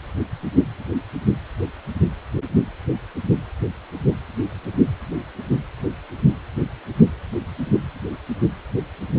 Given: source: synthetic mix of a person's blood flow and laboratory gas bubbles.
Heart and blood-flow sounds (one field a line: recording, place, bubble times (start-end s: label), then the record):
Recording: Doppler ultrasound of blood flow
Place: precordium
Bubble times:
no bubbles
From the record:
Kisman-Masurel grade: 000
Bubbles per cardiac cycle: 0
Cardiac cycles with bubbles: 0%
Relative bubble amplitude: no bubbles discernible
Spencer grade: 0 (complete lack of bubble signals)